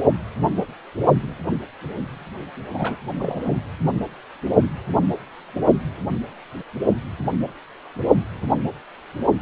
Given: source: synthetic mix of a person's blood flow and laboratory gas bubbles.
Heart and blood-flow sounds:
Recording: Doppler ultrasound of blood flow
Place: precordium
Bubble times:
2.74-2.97 s: bubbles
3.20-3.43 s: bubbles
3.45-3.54 s: bubbles
From the record:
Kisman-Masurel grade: 221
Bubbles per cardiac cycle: several, 3 to 8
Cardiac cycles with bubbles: 10 to 50%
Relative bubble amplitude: barely perceptible (0.100 to 0.250)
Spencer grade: 2 (many but less than half of the cardiac periods contain bubble signals, singularly or in groups)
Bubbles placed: anywhere in the cardiac cycle

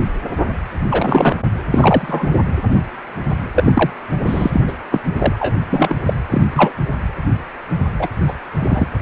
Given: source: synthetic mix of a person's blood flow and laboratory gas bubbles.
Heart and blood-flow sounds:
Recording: Doppler ultrasound of blood flow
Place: precordium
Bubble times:
0.90-1.37 s: bubbles
1.71-2.28 s: bubbles
3.55-3.90 s: bubbles
4.26-4.51 s: bubbles
4.53-4.62 s: bubbles
4.67-4.73 s: bubbles
4.91-5.00 s: bubbles
5.18-5.36 s: bubbles
5.38-5.55 s: bubbles
5.70-5.96 s: bubbles
6.05-6.13 s: bubbles
6.30-6.42 s: bubbles
6.54-6.72 s: bubbles
7.98-8.08 s: bubbles
8.27-8.34 s: bubbles
8.56-8.88 s: bubbles
From the record:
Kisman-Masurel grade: 233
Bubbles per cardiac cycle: several, 3 to 8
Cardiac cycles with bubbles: 50 to 99%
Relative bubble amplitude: loud (0.450 to 0.775)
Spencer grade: 3 (all of the cardiac periods contain showers or single bubble signals, but not dominating or overriding the cardiac motion signals)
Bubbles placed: anywhere in the cardiac cycle

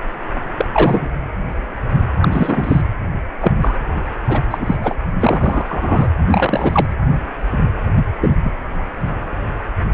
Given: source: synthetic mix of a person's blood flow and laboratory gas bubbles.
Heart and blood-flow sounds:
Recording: Doppler ultrasound of blood flow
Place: precordium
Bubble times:
0.56-0.66 s: bubbles
0.72-1.14 s: bubbles
2.21-2.81 s: bubbles
3.42-3.52 s: bubbles
3.61-3.75 s: bubbles
4.28-4.41 s: bubbles
4.48-4.95 s: bubbles
5.19-5.66 s: bubbles
5.69-6.10 s: bubbles
6.27-6.86 s: bubbles
7.96-8.02 s: bubbles
8.21-8.36 s: bubbles
8.43-8.53 s: bubbles
From the record:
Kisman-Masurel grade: 233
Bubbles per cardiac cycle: several, 3 to 8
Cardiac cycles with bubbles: 50 to 99%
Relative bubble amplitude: loud (0.450 to 0.775)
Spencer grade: 3 (all of the cardiac periods contain showers or single bubble signals, but not dominating or overriding the cardiac motion signals)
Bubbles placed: anywhere in the cardiac cycle

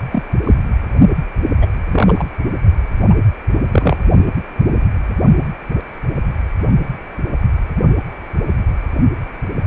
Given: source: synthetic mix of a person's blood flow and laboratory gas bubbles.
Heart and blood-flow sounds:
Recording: Doppler ultrasound of blood flow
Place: precordium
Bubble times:
0.11-0.23 s: bubbles
0.43-0.54 s: bubbles
1.61-1.68 s: bubbles
1.91-2.25 s: bubbles
3.09-3.15 s: bubbles
3.71-3.98 s: bubbles
From the record:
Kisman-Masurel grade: 123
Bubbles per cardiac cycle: 1 to 2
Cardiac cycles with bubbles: 10 to 50%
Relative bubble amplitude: loud (0.450 to 0.775)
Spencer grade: 2 (many but less than half of the cardiac periods contain bubble signals, singularly or in groups)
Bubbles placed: only in the low amplitude regions of the cardiac cycle

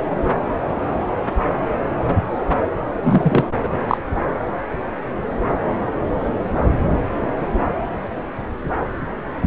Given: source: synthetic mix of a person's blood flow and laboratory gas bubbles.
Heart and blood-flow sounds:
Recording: Doppler ultrasound of blood flow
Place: subclavian vein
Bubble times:
3.02-3.44 s: bubbles
3.62-3.69 s: bubbles
3.88-3.97 s: bubbles
From the record:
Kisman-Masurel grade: 213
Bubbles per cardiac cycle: several, 3 to 8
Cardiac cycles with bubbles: 1 to 10%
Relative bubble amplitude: loud (0.450 to 0.775)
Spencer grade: 1 (occasional bubble signal discernible with the cardiac motion signal, with majority of cardiac periods free of bubbles)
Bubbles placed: anywhere in the cardiac cycle

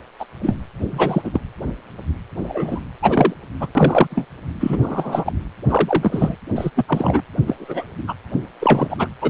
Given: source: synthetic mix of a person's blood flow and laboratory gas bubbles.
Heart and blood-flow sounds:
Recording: Doppler ultrasound of blood flow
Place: precordium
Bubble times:
0.19-0.26 s: bubbles
0.42-0.57 s: bubbles
0.91-1.22 s: bubbles
1.24-1.41 s: bubbles
2.42-2.79 s: bubbles
3.02-3.33 s: bubbles
3.59-3.72 s: bubbles
3.75-4.07 s: bubbles
4.10-4.25 s: bubbles
4.60-5.33 s: bubbles
5.68-6.35 s: bubbles
6.55-6.71 s: bubbles
6.75-6.85 s: bubbles
6.88-7.21 s: bubbles
7.46-7.91 s: bubbles
8.07-8.14 s: bubbles
8.60-9.08 s: bubbles
9.21-9.30 s: bubbles
From the record:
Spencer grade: 3 (all of the cardiac periods contain showers or single bubble signals, but not dominating or overriding the cardiac motion signals)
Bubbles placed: anywhere in the cardiac cycle

